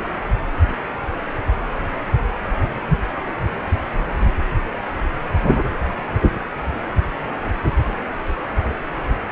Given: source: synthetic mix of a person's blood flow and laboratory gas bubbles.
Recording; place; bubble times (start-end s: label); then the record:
Doppler ultrasound of blood flow; precordium
no bubbles
From the record:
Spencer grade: 0 (complete lack of bubble signals)